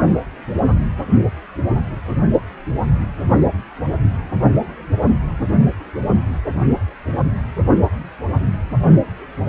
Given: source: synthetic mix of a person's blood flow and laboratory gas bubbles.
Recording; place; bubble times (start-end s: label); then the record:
Doppler ultrasound of blood flow; precordium
no bubbles
From the record:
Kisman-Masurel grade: 000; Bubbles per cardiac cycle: 0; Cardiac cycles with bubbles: 0%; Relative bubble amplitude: no bubbles discernible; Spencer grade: 0 (complete lack of bubble signals)